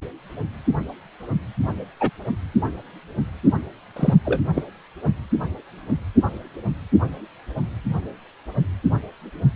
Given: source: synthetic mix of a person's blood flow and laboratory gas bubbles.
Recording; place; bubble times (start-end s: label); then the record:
Doppler ultrasound of blood flow; precordium
2.00-2.10 s: bubbles
3.96-4.14 s: bubbles
4.25-4.41 s: bubbles
4.54-4.64 s: bubbles
From the record:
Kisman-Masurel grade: 123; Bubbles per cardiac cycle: 1 to 2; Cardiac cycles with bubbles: 10 to 50%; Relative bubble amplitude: loud (0.450 to 0.775); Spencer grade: 2 (many but less than half of the cardiac periods contain bubble signals, singularly or in groups); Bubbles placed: anywhere in the cardiac cycle